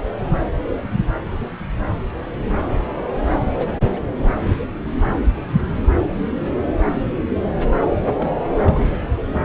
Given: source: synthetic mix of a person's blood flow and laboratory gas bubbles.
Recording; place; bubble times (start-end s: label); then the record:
Doppler ultrasound of blood flow; subclavian vein
3.41-3.54 s: bubbles
3.58-3.75 s: bubbles
3.86-4.11 s: bubbles
8.14-8.30 s: bubbles
8.50-8.95 s: bubbles
From the record:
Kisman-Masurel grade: 221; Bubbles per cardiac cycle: several, 3 to 8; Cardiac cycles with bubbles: 10 to 50%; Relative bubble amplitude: barely perceptible (0.100 to 0.250); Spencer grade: 2 (many but less than half of the cardiac periods contain bubble signals, singularly or in groups); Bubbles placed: anywhere in the cardiac cycle